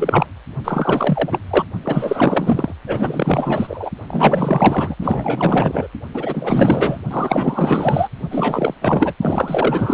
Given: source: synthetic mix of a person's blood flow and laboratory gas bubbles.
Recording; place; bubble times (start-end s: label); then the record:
Doppler ultrasound of blood flow; precordium
0.00-0.26 s: bubbles
0.65-1.39 s: bubbles
1.50-1.65 s: bubbles
1.83-2.74 s: bubbles
2.87-3.90 s: bubbles
4.08-4.96 s: bubbles
5.01-5.87 s: bubbles
6.14-6.99 s: bubbles
7.11-8.08 s: bubbles
8.30-8.75 s: bubbles
8.82-9.13 s: bubbles
9.21-9.94 s: bubbles
From the record:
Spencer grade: 4 (maximum detectable bubble signal sounding continuously throughout systole and diastole of every cardiac period, and overriding the amplitude of the normal cardiac signals); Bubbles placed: only in the low amplitude regions of the cardiac cycle